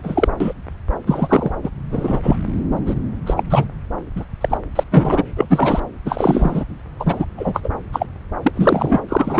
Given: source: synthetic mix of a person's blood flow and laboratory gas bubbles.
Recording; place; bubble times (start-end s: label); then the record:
Doppler ultrasound of blood flow; subclavian vein
0.03-0.28 s: bubbles
0.40-0.53 s: bubbles
1.06-1.52 s: bubbles
1.63-1.70 s: bubbles
1.91-2.19 s: bubbles
2.22-2.36 s: bubbles
2.86-2.94 s: bubbles
3.26-3.41 s: bubbles
3.50-3.67 s: bubbles
4.16-4.25 s: bubbles
4.41-4.58 s: bubbles
4.75-4.83 s: bubbles
4.92-5.22 s: bubbles
5.35-5.45 s: bubbles
5.50-5.80 s: bubbles
6.05-6.64 s: bubbles
6.99-7.25 s: bubbles
7.37-7.60 s: bubbles
7.63-7.69 s: bubbles
7.93-8.06 s: bubbles
8.42-8.51 s: bubbles
8.53-9.02 s: bubbles
9.08-9.40 s: bubbles
From the record:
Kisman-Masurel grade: 243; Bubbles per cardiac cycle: several, 3 to 8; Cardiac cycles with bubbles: 100%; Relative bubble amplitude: loud (0.450 to 0.775); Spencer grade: 3 (all of the cardiac periods contain showers or single bubble signals, but not dominating or overriding the cardiac motion signals); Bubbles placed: anywhere in the cardiac cycle